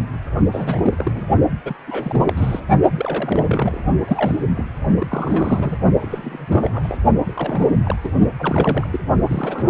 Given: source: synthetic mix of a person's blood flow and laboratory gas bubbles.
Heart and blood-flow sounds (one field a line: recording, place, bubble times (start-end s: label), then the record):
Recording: Doppler ultrasound of blood flow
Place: precordium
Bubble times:
0.52-1.25 s: bubbles
1.65-1.75 s: bubbles
1.87-2.22 s: bubbles
2.26-2.60 s: bubbles
2.95-3.81 s: bubbles
4.07-4.37 s: bubbles
4.54-4.65 s: bubbles
4.98-5.78 s: bubbles
6.00-6.98 s: bubbles
7.26-7.71 s: bubbles
7.83-7.96 s: bubbles
8.04-8.12 s: bubbles
8.38-8.88 s: bubbles
8.92-9.00 s: bubbles
9.28-9.70 s: bubbles
From the record:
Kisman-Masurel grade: 342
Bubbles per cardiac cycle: rolling drumbeat, 9 or more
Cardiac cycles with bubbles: 100%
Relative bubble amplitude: moderate (0.250 to 0.450)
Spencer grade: 3 (all of the cardiac periods contain showers or single bubble signals, but not dominating or overriding the cardiac motion signals)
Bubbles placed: only in the low amplitude regions of the cardiac cycle